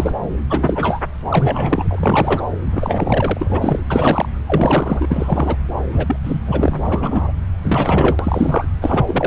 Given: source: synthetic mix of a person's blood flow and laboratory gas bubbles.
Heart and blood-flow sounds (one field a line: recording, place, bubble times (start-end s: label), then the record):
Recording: Doppler ultrasound of blood flow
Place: subclavian vein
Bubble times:
0.00-0.13 s: bubbles
0.49-0.99 s: bubbles
1.29-1.88 s: bubbles
1.91-2.46 s: bubbles
2.71-3.79 s: bubbles
3.90-4.29 s: bubbles
4.46-5.05 s: bubbles
5.08-5.56 s: bubbles
5.92-6.16 s: bubbles
6.24-6.39 s: bubbles
6.47-6.79 s: bubbles
6.85-7.33 s: bubbles
7.58-8.68 s: bubbles
8.81-9.26 s: bubbles
From the record:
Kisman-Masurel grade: 343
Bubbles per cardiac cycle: rolling drumbeat, 9 or more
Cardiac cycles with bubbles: 100%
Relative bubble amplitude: loud (0.450 to 0.775)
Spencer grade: 3 (all of the cardiac periods contain showers or single bubble signals, but not dominating or overriding the cardiac motion signals)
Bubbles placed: anywhere in the cardiac cycle